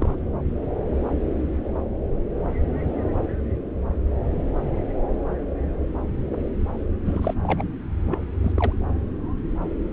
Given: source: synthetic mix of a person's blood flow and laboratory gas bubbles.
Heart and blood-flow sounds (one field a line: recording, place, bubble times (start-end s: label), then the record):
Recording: Doppler ultrasound of blood flow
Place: subclavian vein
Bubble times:
0.00-0.15 s: bubbles
7.05-7.34 s: bubbles
7.42-7.64 s: bubbles
8.11-8.18 s: bubbles
8.44-8.52 s: bubbles
8.55-8.73 s: bubbles
From the record:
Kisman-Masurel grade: 221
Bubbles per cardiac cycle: several, 3 to 8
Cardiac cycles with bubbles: 10 to 50%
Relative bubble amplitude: barely perceptible (0.100 to 0.250)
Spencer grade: 2 (many but less than half of the cardiac periods contain bubble signals, singularly or in groups)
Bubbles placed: anywhere in the cardiac cycle